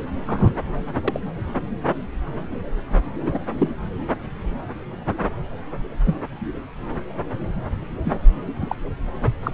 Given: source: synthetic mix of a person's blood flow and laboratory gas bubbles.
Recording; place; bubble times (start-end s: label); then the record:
Doppler ultrasound of blood flow; subclavian vein
0.26-0.53 s: bubbles
0.95-1.00 s: bubbles
1.08-1.19 s: bubbles
3.20-3.39 s: bubbles
3.58-3.73 s: bubbles
6.06-6.16 s: bubbles
8.04-8.20 s: bubbles
8.61-8.75 s: bubbles
9.43-9.51 s: bubbles
From the record:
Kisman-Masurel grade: 122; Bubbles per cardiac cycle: 1 to 2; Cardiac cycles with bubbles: 10 to 50%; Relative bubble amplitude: moderate (0.250 to 0.450); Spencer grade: 2 (many but less than half of the cardiac periods contain bubble signals, singularly or in groups); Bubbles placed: anywhere in the cardiac cycle